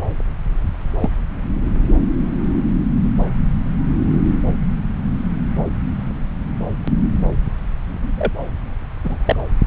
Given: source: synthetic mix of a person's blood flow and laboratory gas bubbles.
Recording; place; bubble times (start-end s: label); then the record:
Doppler ultrasound of blood flow; subclavian vein
1.01-1.10 s: bubbles
8.17-8.31 s: bubbles
9.04-9.17 s: bubbles
9.25-9.36 s: bubbles
From the record:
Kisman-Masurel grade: 122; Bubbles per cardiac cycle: 1 to 2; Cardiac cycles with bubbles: 10 to 50%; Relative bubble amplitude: moderate (0.250 to 0.450); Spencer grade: 2 (many but less than half of the cardiac periods contain bubble signals, singularly or in groups); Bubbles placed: anywhere in the cardiac cycle